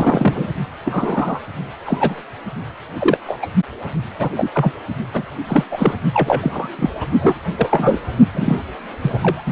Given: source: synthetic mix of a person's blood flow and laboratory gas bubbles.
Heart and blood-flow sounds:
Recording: Doppler ultrasound of blood flow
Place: precordium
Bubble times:
0.00-0.49 s: bubbles
0.85-1.40 s: bubbles
1.84-2.23 s: bubbles
2.98-3.18 s: bubbles
3.26-3.40 s: bubbles
3.42-3.47 s: bubbles
4.18-4.29 s: bubbles
4.37-4.50 s: bubbles
4.52-4.72 s: bubbles
5.13-5.23 s: bubbles
5.48-5.64 s: bubbles
5.71-5.94 s: bubbles
6.13-6.69 s: bubbles
6.79-6.90 s: bubbles
7.00-7.05 s: bubbles
7.21-7.37 s: bubbles
7.56-7.98 s: bubbles
8.34-8.58 s: bubbles
9.02-9.43 s: bubbles
9.46-9.52 s: bubbles
From the record:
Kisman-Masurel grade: 233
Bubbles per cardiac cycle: several, 3 to 8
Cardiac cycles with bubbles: 50 to 99%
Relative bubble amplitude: loud (0.450 to 0.775)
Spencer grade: 3 (all of the cardiac periods contain showers or single bubble signals, but not dominating or overriding the cardiac motion signals)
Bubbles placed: only in the low amplitude regions of the cardiac cycle

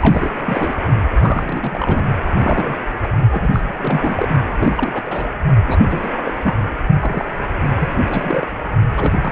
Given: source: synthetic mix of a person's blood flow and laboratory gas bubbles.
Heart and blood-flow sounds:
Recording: Doppler ultrasound of blood flow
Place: precordium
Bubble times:
0.01-0.30 s: bubbles
0.33-0.75 s: bubbles
1.19-2.02 s: bubbles
2.25-2.30 s: bubbles
2.39-2.77 s: bubbles
3.02-3.08 s: bubbles
3.31-4.28 s: bubbles
4.58-5.34 s: bubbles
5.65-6.09 s: bubbles
6.12-6.34 s: bubbles
6.43-6.54 s: bubbles
7.00-7.25 s: bubbles
7.74-7.96 s: bubbles
8.10-8.47 s: bubbles
8.96-9.12 s: bubbles
9.21-9.32 s: bubbles
From the record:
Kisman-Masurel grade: 332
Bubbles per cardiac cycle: rolling drumbeat, 9 or more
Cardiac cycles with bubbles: 50 to 99%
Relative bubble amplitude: moderate (0.250 to 0.450)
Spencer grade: 3 (all of the cardiac periods contain showers or single bubble signals, but not dominating or overriding the cardiac motion signals)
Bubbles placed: only in the low amplitude regions of the cardiac cycle

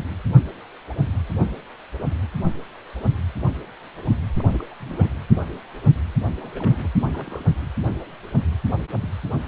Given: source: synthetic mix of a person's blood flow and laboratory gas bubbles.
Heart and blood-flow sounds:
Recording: Doppler ultrasound of blood flow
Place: precordium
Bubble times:
4.38-4.64 s: bubbles
4.69-4.74 s: bubbles
4.80-5.13 s: bubbles
6.39-6.88 s: bubbles
6.94-6.98 s: bubbles
7.04-7.43 s: bubbles
9.00-9.09 s: bubbles
From the record:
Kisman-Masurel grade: 221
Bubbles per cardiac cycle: several, 3 to 8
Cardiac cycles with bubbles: 10 to 50%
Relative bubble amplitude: barely perceptible (0.100 to 0.250)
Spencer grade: 2 (many but less than half of the cardiac periods contain bubble signals, singularly or in groups)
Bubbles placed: anywhere in the cardiac cycle

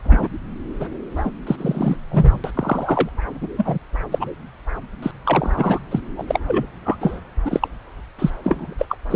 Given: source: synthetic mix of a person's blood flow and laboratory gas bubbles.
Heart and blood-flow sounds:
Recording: Doppler ultrasound of blood flow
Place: subclavian vein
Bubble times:
0.04-0.29 s: bubbles
0.80-0.88 s: bubbles
1.16-1.31 s: bubbles
1.46-1.97 s: bubbles
2.10-2.40 s: bubbles
2.44-2.51 s: bubbles
2.54-3.09 s: bubbles
3.41-3.49 s: bubbles
3.58-3.78 s: bubbles
4.11-4.30 s: bubbles
5.02-5.11 s: bubbles
5.25-5.79 s: bubbles
5.91-6.00 s: bubbles
6.15-6.22 s: bubbles
6.27-6.39 s: bubbles
6.47-6.67 s: bubbles
6.85-6.96 s: bubbles
7.00-7.20 s: bubbles
7.44-7.68 s: bubbles
8.19-8.30 s: bubbles
8.44-8.75 s: bubbles
8.79-8.86 s: bubbles
8.89-8.96 s: bubbles
9.10-9.15 s: bubbles
From the record:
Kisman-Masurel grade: 242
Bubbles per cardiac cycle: several, 3 to 8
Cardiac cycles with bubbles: 100%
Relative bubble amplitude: moderate (0.250 to 0.450)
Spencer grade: 3 (all of the cardiac periods contain showers or single bubble signals, but not dominating or overriding the cardiac motion signals)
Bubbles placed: anywhere in the cardiac cycle

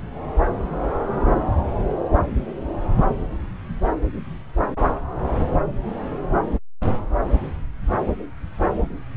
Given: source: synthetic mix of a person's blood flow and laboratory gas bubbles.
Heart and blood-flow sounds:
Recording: Doppler ultrasound of blood flow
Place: subclavian vein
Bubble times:
no bubbles
From the record:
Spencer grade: 0 (complete lack of bubble signals)

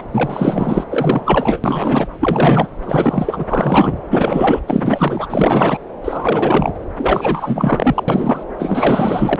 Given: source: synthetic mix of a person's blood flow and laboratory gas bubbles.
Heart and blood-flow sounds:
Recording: Doppler ultrasound of blood flow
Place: subclavian vein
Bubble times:
0.00-0.08 s: bubbles
0.11-0.84 s: bubbles
0.89-1.60 s: bubbles
1.64-2.07 s: bubbles
2.19-2.68 s: bubbles
2.85-3.44 s: bubbles
3.47-3.98 s: bubbles
4.10-4.60 s: bubbles
4.67-5.27 s: bubbles
5.30-5.80 s: bubbles
6.02-6.72 s: bubbles
6.97-8.04 s: bubbles
8.07-8.43 s: bubbles
8.58-9.36 s: bubbles
From the record:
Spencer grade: 4 (maximum detectable bubble signal sounding continuously throughout systole and diastole of every cardiac period, and overriding the amplitude of the normal cardiac signals)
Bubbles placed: anywhere in the cardiac cycle

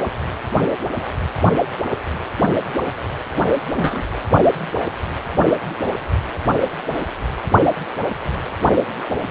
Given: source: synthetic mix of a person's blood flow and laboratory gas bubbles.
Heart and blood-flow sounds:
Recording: Doppler ultrasound of blood flow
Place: precordium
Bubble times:
3.76-4.03 s: bubbles
From the record:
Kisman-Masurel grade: 112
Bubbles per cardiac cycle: 1 to 2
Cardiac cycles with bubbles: 1 to 10%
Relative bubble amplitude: moderate (0.250 to 0.450)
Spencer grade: 1 (occasional bubble signal discernible with the cardiac motion signal, with majority of cardiac periods free of bubbles)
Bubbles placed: only in the low amplitude regions of the cardiac cycle

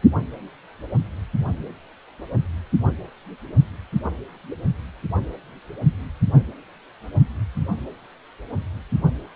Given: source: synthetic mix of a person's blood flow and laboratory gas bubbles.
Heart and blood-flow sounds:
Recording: Doppler ultrasound of blood flow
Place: precordium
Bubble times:
no bubbles
From the record:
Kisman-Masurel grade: 000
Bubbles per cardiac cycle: 0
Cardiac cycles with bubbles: 0%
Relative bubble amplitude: no bubbles discernible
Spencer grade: 0 (complete lack of bubble signals)

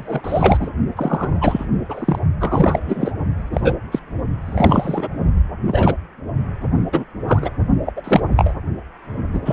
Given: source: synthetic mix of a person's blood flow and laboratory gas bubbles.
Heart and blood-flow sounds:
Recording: Doppler ultrasound of blood flow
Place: precordium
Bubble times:
0.00-0.70 s: bubbles
0.96-1.66 s: bubbles
1.89-2.19 s: bubbles
2.40-3.12 s: bubbles
3.53-3.73 s: bubbles
3.92-3.99 s: bubbles
4.46-5.08 s: bubbles
5.66-5.95 s: bubbles
6.92-7.05 s: bubbles
7.27-7.51 s: bubbles
7.86-7.93 s: bubbles
7.96-8.02 s: bubbles
8.04-8.21 s: bubbles
8.36-8.54 s: bubbles
9.33-9.41 s: bubbles
9.45-9.53 s: bubbles
From the record:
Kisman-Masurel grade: 243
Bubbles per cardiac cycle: several, 3 to 8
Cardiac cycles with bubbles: 100%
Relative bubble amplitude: loud (0.450 to 0.775)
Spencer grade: 3 (all of the cardiac periods contain showers or single bubble signals, but not dominating or overriding the cardiac motion signals)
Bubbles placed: only in the low amplitude regions of the cardiac cycle

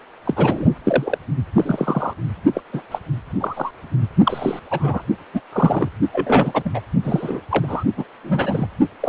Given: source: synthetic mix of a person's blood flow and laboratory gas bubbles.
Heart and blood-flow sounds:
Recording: Doppler ultrasound of blood flow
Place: precordium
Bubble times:
0.25-0.69 s: bubbles
0.84-1.18 s: bubbles
1.55-2.13 s: bubbles
2.54-2.61 s: bubbles
2.72-2.82 s: bubbles
2.91-2.98 s: bubbles
3.40-3.71 s: bubbles
4.25-4.59 s: bubbles
4.71-5.01 s: bubbles
5.33-5.41 s: bubbles
5.52-5.89 s: bubbles
6.12-6.62 s: bubbles
6.65-6.70 s: bubbles
6.74-6.80 s: bubbles
7.03-7.40 s: bubbles
7.50-7.83 s: bubbles
7.97-8.04 s: bubbles
8.24-8.67 s: bubbles
9.00-9.09 s: bubbles
From the record:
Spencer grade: 3 (all of the cardiac periods contain showers or single bubble signals, but not dominating or overriding the cardiac motion signals)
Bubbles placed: only in the low amplitude regions of the cardiac cycle

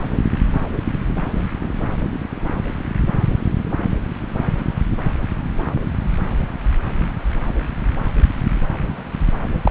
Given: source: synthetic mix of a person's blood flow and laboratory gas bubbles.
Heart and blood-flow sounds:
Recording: Doppler ultrasound of blood flow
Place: subclavian vein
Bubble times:
9.63-9.71 s: bubbles
From the record:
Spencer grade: 1 (occasional bubble signal discernible with the cardiac motion signal, with majority of cardiac periods free of bubbles)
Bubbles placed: anywhere in the cardiac cycle

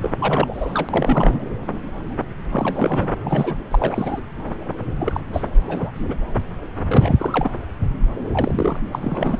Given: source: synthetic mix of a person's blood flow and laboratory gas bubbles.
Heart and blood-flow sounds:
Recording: Doppler ultrasound of blood flow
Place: subclavian vein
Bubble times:
0.02-0.10 s: bubbles
0.18-1.45 s: bubbles
2.50-3.12 s: bubbles
3.23-3.56 s: bubbles
3.71-4.19 s: bubbles
4.99-5.21 s: bubbles
5.32-5.43 s: bubbles
5.68-5.91 s: bubbles
5.95-6.16 s: bubbles
6.88-7.49 s: bubbles
8.32-8.79 s: bubbles
8.92-9.38 s: bubbles
From the record:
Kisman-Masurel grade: 232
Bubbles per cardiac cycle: several, 3 to 8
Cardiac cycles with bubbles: 50 to 99%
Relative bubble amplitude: moderate (0.250 to 0.450)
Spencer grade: 3 (all of the cardiac periods contain showers or single bubble signals, but not dominating or overriding the cardiac motion signals)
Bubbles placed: anywhere in the cardiac cycle

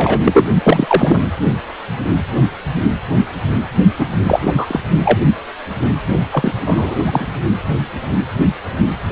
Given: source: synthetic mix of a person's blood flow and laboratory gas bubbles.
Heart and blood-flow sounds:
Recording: Doppler ultrasound of blood flow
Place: precordium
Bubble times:
0.00-0.19 s: bubbles
0.24-0.46 s: bubbles
0.63-1.20 s: bubbles
3.99-4.13 s: bubbles
4.27-4.54 s: bubbles
4.57-4.80 s: bubbles
5.04-5.19 s: bubbles
6.31-6.52 s: bubbles
6.66-6.95 s: bubbles
7.05-7.26 s: bubbles
From the record:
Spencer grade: 2 (many but less than half of the cardiac periods contain bubble signals, singularly or in groups)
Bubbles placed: only in the low amplitude regions of the cardiac cycle

